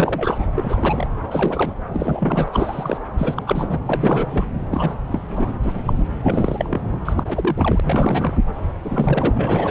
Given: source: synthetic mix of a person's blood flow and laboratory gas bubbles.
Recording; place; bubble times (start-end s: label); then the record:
Doppler ultrasound of blood flow; subclavian vein
0.00-0.45 s: bubbles
0.56-1.06 s: bubbles
1.31-1.73 s: bubbles
1.88-2.48 s: bubbles
2.52-2.98 s: bubbles
3.17-3.42 s: bubbles
3.46-3.78 s: bubbles
3.85-4.44 s: bubbles
4.70-5.01 s: bubbles
5.11-5.54 s: bubbles
5.62-5.82 s: bubbles
5.85-6.03 s: bubbles
6.23-6.80 s: bubbles
7.04-7.80 s: bubbles
7.83-8.39 s: bubbles
8.83-9.32 s: bubbles
9.34-9.71 s: bubbles
From the record:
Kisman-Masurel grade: 342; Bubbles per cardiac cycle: rolling drumbeat, 9 or more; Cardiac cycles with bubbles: 100%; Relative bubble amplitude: moderate (0.250 to 0.450); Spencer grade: 3 (all of the cardiac periods contain showers or single bubble signals, but not dominating or overriding the cardiac motion signals); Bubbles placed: anywhere in the cardiac cycle